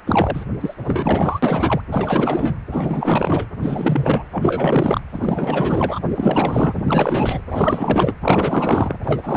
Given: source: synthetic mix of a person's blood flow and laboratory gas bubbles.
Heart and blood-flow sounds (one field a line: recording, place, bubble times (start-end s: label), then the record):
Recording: Doppler ultrasound of blood flow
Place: precordium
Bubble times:
0.06-0.45 s: bubbles
0.60-0.74 s: bubbles
0.77-1.40 s: bubbles
1.42-1.81 s: bubbles
1.91-2.57 s: bubbles
2.71-3.45 s: bubbles
3.60-4.23 s: bubbles
4.31-5.01 s: bubbles
5.11-6.00 s: bubbles
6.03-7.41 s: bubbles
7.50-8.13 s: bubbles
8.21-8.98 s: bubbles
9.04-9.37 s: bubbles
From the record:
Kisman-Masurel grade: 444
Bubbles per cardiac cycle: continuous sound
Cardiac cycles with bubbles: 100%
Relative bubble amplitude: maximal (0.775 to 0.999)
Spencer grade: 4 (maximum detectable bubble signal sounding continuously throughout systole and diastole of every cardiac period, and overriding the amplitude of the normal cardiac signals)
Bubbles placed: anywhere in the cardiac cycle